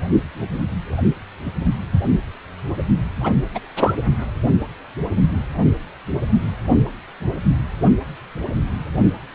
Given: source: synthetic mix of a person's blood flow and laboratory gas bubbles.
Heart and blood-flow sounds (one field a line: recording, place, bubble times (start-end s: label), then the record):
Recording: Doppler ultrasound of blood flow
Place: precordium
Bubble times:
3.21-3.33 s: bubbles
3.54-3.60 s: bubbles
3.75-3.93 s: bubbles
From the record:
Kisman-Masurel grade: 212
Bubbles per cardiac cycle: several, 3 to 8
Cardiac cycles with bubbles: 1 to 10%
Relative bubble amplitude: moderate (0.250 to 0.450)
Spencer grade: 1 (occasional bubble signal discernible with the cardiac motion signal, with majority of cardiac periods free of bubbles)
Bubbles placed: only in the low amplitude regions of the cardiac cycle